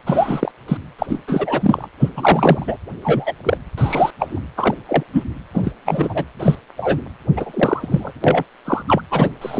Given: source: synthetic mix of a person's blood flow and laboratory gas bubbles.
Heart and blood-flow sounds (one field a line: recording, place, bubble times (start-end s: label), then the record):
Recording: Doppler ultrasound of blood flow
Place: precordium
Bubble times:
0.06-0.52 s: bubbles
0.68-0.77 s: bubbles
0.98-1.06 s: bubbles
1.09-1.19 s: bubbles
1.27-1.88 s: bubbles
2.00-2.08 s: bubbles
2.17-2.77 s: bubbles
3.02-3.33 s: bubbles
3.43-3.57 s: bubbles
3.77-4.11 s: bubbles
4.19-4.40 s: bubbles
4.57-4.75 s: bubbles
4.88-5.04 s: bubbles
5.12-5.23 s: bubbles
5.54-5.71 s: bubbles
5.85-6.25 s: bubbles
6.40-6.55 s: bubbles
6.77-7.01 s: bubbles
7.37-8.12 s: bubbles
8.24-8.44 s: bubbles
8.64-8.83 s: bubbles
8.88-9.02 s: bubbles
9.11-9.29 s: bubbles
9.41-9.60 s: bubbles
From the record:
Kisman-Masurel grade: 243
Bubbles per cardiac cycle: several, 3 to 8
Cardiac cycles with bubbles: 100%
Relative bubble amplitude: loud (0.450 to 0.775)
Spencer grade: 3 (all of the cardiac periods contain showers or single bubble signals, but not dominating or overriding the cardiac motion signals)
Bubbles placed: anywhere in the cardiac cycle